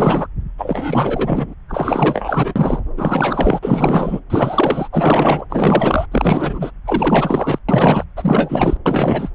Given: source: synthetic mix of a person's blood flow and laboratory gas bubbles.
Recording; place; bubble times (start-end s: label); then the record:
Doppler ultrasound of blood flow; subclavian vein
0.00-0.27 s: bubbles
0.58-1.54 s: bubbles
1.69-2.82 s: bubbles
2.97-3.60 s: bubbles
3.62-4.20 s: bubbles
4.30-4.88 s: bubbles
4.92-5.46 s: bubbles
5.50-6.06 s: bubbles
6.12-6.71 s: bubbles
6.86-7.58 s: bubbles
7.68-8.04 s: bubbles
8.16-8.77 s: bubbles
8.85-9.29 s: bubbles
From the record:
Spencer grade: 4 (maximum detectable bubble signal sounding continuously throughout systole and diastole of every cardiac period, and overriding the amplitude of the normal cardiac signals); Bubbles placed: anywhere in the cardiac cycle